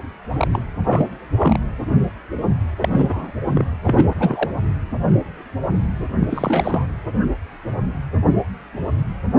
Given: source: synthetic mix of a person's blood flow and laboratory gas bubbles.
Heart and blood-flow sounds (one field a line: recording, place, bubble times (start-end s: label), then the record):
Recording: Doppler ultrasound of blood flow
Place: precordium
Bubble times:
0.30-0.62 s: bubbles
0.89-1.07 s: bubbles
1.36-1.59 s: bubbles
2.80-3.32 s: bubbles
3.45-3.65 s: bubbles
3.84-4.50 s: bubbles
6.21-6.26 s: bubbles
6.29-6.87 s: bubbles
From the record:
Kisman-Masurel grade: 222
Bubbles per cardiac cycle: several, 3 to 8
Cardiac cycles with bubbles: 10 to 50%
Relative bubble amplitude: moderate (0.250 to 0.450)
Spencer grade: 2 (many but less than half of the cardiac periods contain bubble signals, singularly or in groups)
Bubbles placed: anywhere in the cardiac cycle